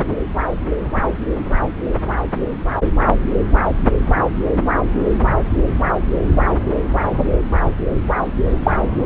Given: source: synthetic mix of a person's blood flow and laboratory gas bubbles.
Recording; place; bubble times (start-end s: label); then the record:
Doppler ultrasound of blood flow; subclavian vein
8.63-8.77 s: bubbles
From the record:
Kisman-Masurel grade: 113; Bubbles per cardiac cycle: 1 to 2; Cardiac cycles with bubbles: 1 to 10%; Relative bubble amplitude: loud (0.450 to 0.775); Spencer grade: 1 (occasional bubble signal discernible with the cardiac motion signal, with majority of cardiac periods free of bubbles); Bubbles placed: anywhere in the cardiac cycle